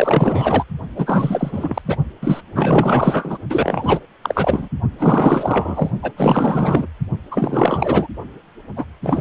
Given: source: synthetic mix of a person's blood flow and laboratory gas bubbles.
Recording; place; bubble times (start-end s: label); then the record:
Doppler ultrasound of blood flow; precordium
0.00-0.65 s: bubbles
0.96-1.82 s: bubbles
1.84-1.95 s: bubbles
2.21-2.42 s: bubbles
2.54-3.38 s: bubbles
3.49-4.00 s: bubbles
4.22-4.68 s: bubbles
4.98-5.90 s: bubbles
6.02-6.12 s: bubbles
6.16-6.87 s: bubbles
7.31-8.07 s: bubbles
8.76-8.85 s: bubbles
9.03-9.21 s: bubbles
From the record:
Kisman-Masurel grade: 444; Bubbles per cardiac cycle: continuous sound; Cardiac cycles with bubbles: 100%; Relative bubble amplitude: maximal (0.775 to 0.999); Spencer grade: 4 (maximum detectable bubble signal sounding continuously throughout systole and diastole of every cardiac period, and overriding the amplitude of the normal cardiac signals); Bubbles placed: only in the low amplitude regions of the cardiac cycle